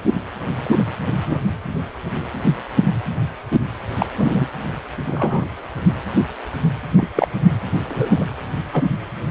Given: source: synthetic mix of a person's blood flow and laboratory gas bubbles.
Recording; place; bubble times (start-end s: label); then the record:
Doppler ultrasound of blood flow; precordium
0.64-0.83 s: bubbles
1.13-1.40 s: bubbles
3.99-4.07 s: bubbles
4.18-4.45 s: bubbles
5.07-5.45 s: bubbles
6.97-7.10 s: bubbles
7.15-7.28 s: bubbles
7.88-8.25 s: bubbles
8.72-8.83 s: bubbles
From the record:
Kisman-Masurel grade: 123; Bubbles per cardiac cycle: 1 to 2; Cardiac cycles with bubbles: 10 to 50%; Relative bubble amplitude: loud (0.450 to 0.775); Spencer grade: 2 (many but less than half of the cardiac periods contain bubble signals, singularly or in groups); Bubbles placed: anywhere in the cardiac cycle